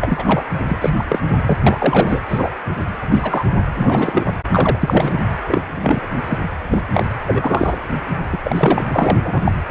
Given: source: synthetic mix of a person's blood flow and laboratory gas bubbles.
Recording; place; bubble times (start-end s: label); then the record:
Doppler ultrasound of blood flow; precordium
0.00-0.42 s: bubbles
0.68-0.93 s: bubbles
0.95-1.03 s: bubbles
1.09-1.24 s: bubbles
1.46-1.58 s: bubbles
1.67-2.23 s: bubbles
2.29-2.53 s: bubbles
3.11-3.44 s: bubbles
3.75-4.40 s: bubbles
4.52-5.18 s: bubbles
5.49-5.62 s: bubbles
5.76-6.07 s: bubbles
6.27-6.38 s: bubbles
6.69-6.83 s: bubbles
6.94-7.06 s: bubbles
7.27-7.79 s: bubbles
8.32-8.38 s: bubbles
8.43-9.52 s: bubbles
From the record:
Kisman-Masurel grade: 243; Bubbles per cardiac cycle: several, 3 to 8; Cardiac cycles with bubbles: 100%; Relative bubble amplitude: loud (0.450 to 0.775); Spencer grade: 3 (all of the cardiac periods contain showers or single bubble signals, but not dominating or overriding the cardiac motion signals); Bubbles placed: anywhere in the cardiac cycle